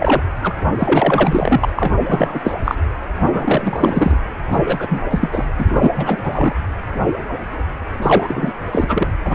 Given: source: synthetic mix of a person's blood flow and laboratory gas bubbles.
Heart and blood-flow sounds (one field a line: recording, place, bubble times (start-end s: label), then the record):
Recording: Doppler ultrasound of blood flow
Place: precordium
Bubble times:
0.00-0.22 s: bubbles
0.42-0.53 s: bubbles
0.79-1.69 s: bubbles
1.75-1.93 s: bubbles
2.08-2.40 s: bubbles
2.43-2.55 s: bubbles
2.64-2.75 s: bubbles
3.21-4.18 s: bubbles
4.50-4.87 s: bubbles
4.89-5.01 s: bubbles
5.09-5.46 s: bubbles
5.58-5.91 s: bubbles
5.95-6.54 s: bubbles
8.02-8.53 s: bubbles
8.71-9.08 s: bubbles
9.25-9.35 s: bubbles
From the record:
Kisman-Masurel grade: 333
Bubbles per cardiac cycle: rolling drumbeat, 9 or more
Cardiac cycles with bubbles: 50 to 99%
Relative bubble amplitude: loud (0.450 to 0.775)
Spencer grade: 3 (all of the cardiac periods contain showers or single bubble signals, but not dominating or overriding the cardiac motion signals)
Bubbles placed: anywhere in the cardiac cycle